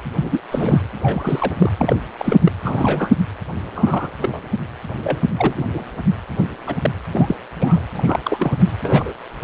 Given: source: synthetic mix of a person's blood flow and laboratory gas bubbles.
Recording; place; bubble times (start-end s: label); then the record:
Doppler ultrasound of blood flow; precordium
0.21-0.40 s: bubbles
0.51-0.79 s: bubbles
1.01-1.52 s: bubbles
1.58-1.72 s: bubbles
1.78-2.00 s: bubbles
2.19-2.37 s: bubbles
2.45-2.52 s: bubbles
2.62-3.10 s: bubbles
3.75-4.11 s: bubbles
4.21-4.46 s: bubbles
5.00-5.24 s: bubbles
5.37-5.66 s: bubbles
5.74-5.83 s: bubbles
6.38-6.43 s: bubbles
6.67-6.75 s: bubbles
6.82-6.91 s: bubbles
7.12-7.36 s: bubbles
7.59-7.85 s: bubbles
7.97-8.19 s: bubbles
8.24-8.56 s: bubbles
8.82-9.14 s: bubbles
From the record:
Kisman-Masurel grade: 242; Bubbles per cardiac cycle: several, 3 to 8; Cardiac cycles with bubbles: 100%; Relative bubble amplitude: moderate (0.250 to 0.450); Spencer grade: 3 (all of the cardiac periods contain showers or single bubble signals, but not dominating or overriding the cardiac motion signals); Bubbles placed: anywhere in the cardiac cycle